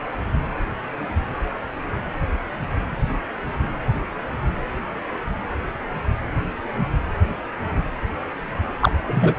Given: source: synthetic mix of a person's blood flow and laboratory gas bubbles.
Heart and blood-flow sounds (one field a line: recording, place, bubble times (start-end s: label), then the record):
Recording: Doppler ultrasound of blood flow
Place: precordium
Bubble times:
8.79-8.91 s: bubbles
9.07-9.34 s: bubbles
From the record:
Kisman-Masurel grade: 213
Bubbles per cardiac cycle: several, 3 to 8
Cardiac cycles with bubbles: 1 to 10%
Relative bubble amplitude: loud (0.450 to 0.775)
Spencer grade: 1 (occasional bubble signal discernible with the cardiac motion signal, with majority of cardiac periods free of bubbles)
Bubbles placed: anywhere in the cardiac cycle